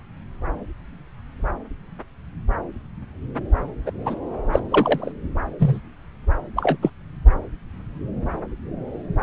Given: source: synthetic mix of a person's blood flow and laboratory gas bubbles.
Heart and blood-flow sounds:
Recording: Doppler ultrasound of blood flow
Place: subclavian vein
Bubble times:
3.85-3.91 s: bubbles
4.05-4.15 s: bubbles
4.53-4.60 s: bubbles
4.69-5.12 s: bubbles
5.59-5.80 s: bubbles
6.55-6.77 s: bubbles
6.81-6.90 s: bubbles
From the record:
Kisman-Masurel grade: 123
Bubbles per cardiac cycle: 1 to 2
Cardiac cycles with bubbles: 10 to 50%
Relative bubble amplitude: loud (0.450 to 0.775)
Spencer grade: 2 (many but less than half of the cardiac periods contain bubble signals, singularly or in groups)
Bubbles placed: anywhere in the cardiac cycle

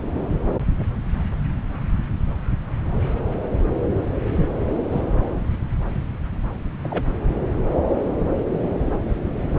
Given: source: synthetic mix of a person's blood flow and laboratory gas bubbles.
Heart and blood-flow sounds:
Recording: Doppler ultrasound of blood flow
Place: subclavian vein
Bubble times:
4.36-4.46 s: bubbles
4.92-5.01 s: bubbles
6.83-7.03 s: bubbles
From the record:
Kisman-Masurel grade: 121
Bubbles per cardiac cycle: 1 to 2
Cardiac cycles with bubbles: 10 to 50%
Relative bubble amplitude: barely perceptible (0.100 to 0.250)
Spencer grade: 2 (many but less than half of the cardiac periods contain bubble signals, singularly or in groups)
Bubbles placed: anywhere in the cardiac cycle

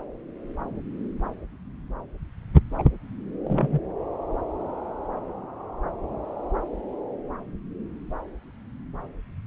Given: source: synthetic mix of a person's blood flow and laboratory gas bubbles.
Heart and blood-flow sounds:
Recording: Doppler ultrasound of blood flow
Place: subclavian vein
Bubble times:
2.78-2.83 s: bubbles
3.44-3.81 s: bubbles
From the record:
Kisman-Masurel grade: 112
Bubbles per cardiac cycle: 1 to 2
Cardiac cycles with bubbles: 1 to 10%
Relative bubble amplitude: moderate (0.250 to 0.450)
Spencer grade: 1 (occasional bubble signal discernible with the cardiac motion signal, with majority of cardiac periods free of bubbles)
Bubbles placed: anywhere in the cardiac cycle

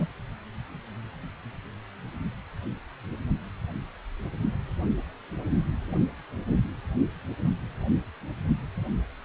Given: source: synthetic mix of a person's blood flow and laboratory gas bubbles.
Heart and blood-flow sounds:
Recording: Doppler ultrasound of blood flow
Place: precordium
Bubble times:
0.00-0.07 s: bubbles
From the record:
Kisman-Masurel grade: 111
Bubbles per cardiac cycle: 1 to 2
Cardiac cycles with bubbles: 1 to 10%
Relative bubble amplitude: barely perceptible (0.100 to 0.250)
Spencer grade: 1 (occasional bubble signal discernible with the cardiac motion signal, with majority of cardiac periods free of bubbles)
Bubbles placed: only in the low amplitude regions of the cardiac cycle

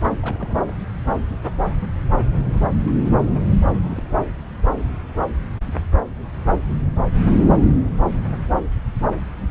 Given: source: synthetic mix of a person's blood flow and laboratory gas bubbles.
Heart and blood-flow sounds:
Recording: Doppler ultrasound of blood flow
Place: subclavian vein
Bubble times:
0.00-0.09 s: bubbles
0.21-0.71 s: bubbles
2.83-2.93 s: bubbles
3.79-4.19 s: bubbles
6.69-6.78 s: bubbles
7.44-7.57 s: bubbles
From the record:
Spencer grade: 2 (many but less than half of the cardiac periods contain bubble signals, singularly or in groups)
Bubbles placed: anywhere in the cardiac cycle

